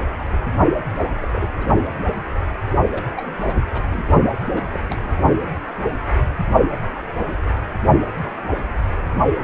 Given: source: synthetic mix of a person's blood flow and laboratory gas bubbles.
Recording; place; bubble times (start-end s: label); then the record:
Doppler ultrasound of blood flow; precordium
0.92-1.11 s: bubbles
1.22-1.26 s: bubbles
1.33-1.47 s: bubbles
1.58-1.66 s: bubbles
2.92-3.04 s: bubbles
3.17-3.32 s: bubbles
3.44-3.56 s: bubbles
3.60-3.66 s: bubbles
3.70-3.86 s: bubbles
3.90-4.03 s: bubbles
4.25-4.29 s: bubbles
4.46-4.63 s: bubbles
4.73-4.80 s: bubbles
4.89-5.09 s: bubbles
From the record:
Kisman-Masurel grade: 221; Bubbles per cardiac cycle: several, 3 to 8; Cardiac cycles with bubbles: 10 to 50%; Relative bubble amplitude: barely perceptible (0.100 to 0.250); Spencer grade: 2 (many but less than half of the cardiac periods contain bubble signals, singularly or in groups); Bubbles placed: only in the low amplitude regions of the cardiac cycle